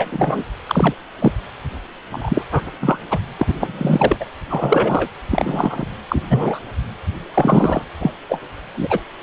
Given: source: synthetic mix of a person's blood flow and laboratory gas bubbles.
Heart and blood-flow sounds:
Doppler ultrasound of blood flow; precordium
0.00-0.44 s: bubbles
0.67-0.94 s: bubbles
1.19-1.31 s: bubbles
2.12-2.42 s: bubbles
2.52-2.63 s: bubbles
2.81-2.98 s: bubbles
3.10-3.19 s: bubbles
3.38-4.17 s: bubbles
4.20-4.25 s: bubbles
4.49-5.08 s: bubbles
5.31-5.86 s: bubbles
6.08-6.22 s: bubbles
6.29-6.59 s: bubbles
7.34-7.83 s: bubbles
8.00-8.12 s: bubbles
8.29-8.40 s: bubbles
8.76-9.00 s: bubbles
From the record:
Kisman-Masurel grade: 243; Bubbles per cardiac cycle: several, 3 to 8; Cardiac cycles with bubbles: 100%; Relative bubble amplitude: loud (0.450 to 0.775); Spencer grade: 3 (all of the cardiac periods contain showers or single bubble signals, but not dominating or overriding the cardiac motion signals); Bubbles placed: anywhere in the cardiac cycle

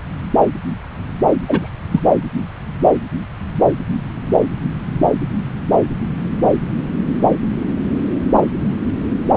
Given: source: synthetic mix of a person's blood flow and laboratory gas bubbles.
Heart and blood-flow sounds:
Doppler ultrasound of blood flow; subclavian vein
1.47-1.70 s: bubbles
1.92-2.00 s: bubbles
From the record:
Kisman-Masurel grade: 123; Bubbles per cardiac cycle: 1 to 2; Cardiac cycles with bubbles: 10 to 50%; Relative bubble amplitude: loud (0.450 to 0.775); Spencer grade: 2 (many but less than half of the cardiac periods contain bubble signals, singularly or in groups); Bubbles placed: anywhere in the cardiac cycle

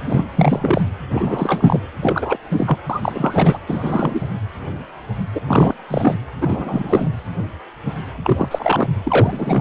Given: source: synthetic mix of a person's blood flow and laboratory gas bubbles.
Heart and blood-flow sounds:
Doppler ultrasound of blood flow; precordium
0.05-0.25 s: bubbles
0.36-0.81 s: bubbles
1.10-1.79 s: bubbles
2.02-2.38 s: bubbles
2.52-2.77 s: bubbles
2.90-3.58 s: bubbles
3.67-4.21 s: bubbles
5.34-5.41 s: bubbles
5.47-5.74 s: bubbles
5.88-6.15 s: bubbles
6.41-7.08 s: bubbles
8.24-8.88 s: bubbles
9.04-9.61 s: bubbles
From the record:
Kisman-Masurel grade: 333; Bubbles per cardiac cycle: rolling drumbeat, 9 or more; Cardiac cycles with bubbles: 50 to 99%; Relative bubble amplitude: loud (0.450 to 0.775); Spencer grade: 3 (all of the cardiac periods contain showers or single bubble signals, but not dominating or overriding the cardiac motion signals); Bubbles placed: anywhere in the cardiac cycle

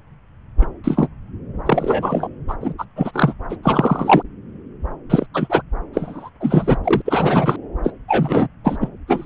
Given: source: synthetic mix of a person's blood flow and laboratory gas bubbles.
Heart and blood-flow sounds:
Doppler ultrasound of blood flow; subclavian vein
0.61-0.66 s: bubbles
0.83-1.08 s: bubbles
1.66-2.28 s: bubbles
2.48-2.54 s: bubbles
2.60-2.74 s: bubbles
2.78-2.85 s: bubbles
2.96-3.33 s: bubbles
3.49-3.56 s: bubbles
3.63-4.22 s: bubbles
5.09-5.27 s: bubbles
5.33-5.62 s: bubbles
5.93-6.29 s: bubbles
6.40-6.77 s: bubbles
6.83-7.02 s: bubbles
7.05-7.56 s: bubbles
7.84-7.93 s: bubbles
8.08-8.48 s: bubbles
8.64-8.77 s: bubbles
8.80-8.89 s: bubbles
9.07-9.26 s: bubbles
From the record:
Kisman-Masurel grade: 243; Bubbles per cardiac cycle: several, 3 to 8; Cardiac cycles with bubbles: 100%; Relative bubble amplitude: loud (0.450 to 0.775); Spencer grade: 3 (all of the cardiac periods contain showers or single bubble signals, but not dominating or overriding the cardiac motion signals); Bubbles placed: anywhere in the cardiac cycle

